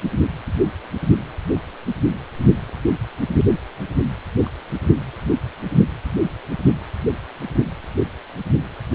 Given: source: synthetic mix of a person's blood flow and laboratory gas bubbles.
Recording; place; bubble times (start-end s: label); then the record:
Doppler ultrasound of blood flow; precordium
4.46-4.49 s: bubbles
From the record:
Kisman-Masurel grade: 121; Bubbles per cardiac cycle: 1 to 2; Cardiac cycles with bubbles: 10 to 50%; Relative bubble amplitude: barely perceptible (0.100 to 0.250); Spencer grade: 2 (many but less than half of the cardiac periods contain bubble signals, singularly or in groups); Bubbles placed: anywhere in the cardiac cycle